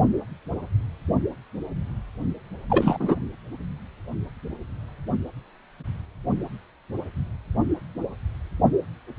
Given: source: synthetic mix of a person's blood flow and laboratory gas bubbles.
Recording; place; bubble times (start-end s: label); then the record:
Doppler ultrasound of blood flow; precordium
2.70-3.16 s: bubbles
From the record:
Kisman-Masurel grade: 212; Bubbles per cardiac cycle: several, 3 to 8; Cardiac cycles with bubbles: 1 to 10%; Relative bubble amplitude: moderate (0.250 to 0.450); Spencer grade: 1 (occasional bubble signal discernible with the cardiac motion signal, with majority of cardiac periods free of bubbles); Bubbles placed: only in the low amplitude regions of the cardiac cycle